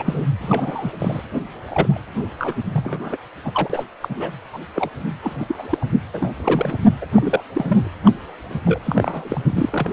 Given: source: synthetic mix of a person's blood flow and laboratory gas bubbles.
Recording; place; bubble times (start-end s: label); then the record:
Doppler ultrasound of blood flow; precordium
0.00-0.29 s: bubbles
0.42-0.91 s: bubbles
0.99-1.22 s: bubbles
1.69-1.98 s: bubbles
2.38-2.56 s: bubbles
2.74-3.17 s: bubbles
3.44-3.84 s: bubbles
4.00-4.30 s: bubbles
4.53-4.59 s: bubbles
4.75-4.89 s: bubbles
5.22-5.46 s: bubbles
5.48-5.68 s: bubbles
5.71-5.78 s: bubbles
5.81-5.85 s: bubbles
6.12-6.31 s: bubbles
6.38-6.78 s: bubbles
7.01-7.06 s: bubbles
7.14-7.43 s: bubbles
7.54-7.90 s: bubbles
8.05-8.12 s: bubbles
8.50-8.59 s: bubbles
8.66-8.79 s: bubbles
8.86-9.43 s: bubbles
9.48-9.93 s: bubbles
From the record:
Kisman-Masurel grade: 242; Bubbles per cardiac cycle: several, 3 to 8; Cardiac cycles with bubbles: 100%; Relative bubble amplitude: moderate (0.250 to 0.450); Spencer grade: 3 (all of the cardiac periods contain showers or single bubble signals, but not dominating or overriding the cardiac motion signals); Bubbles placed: anywhere in the cardiac cycle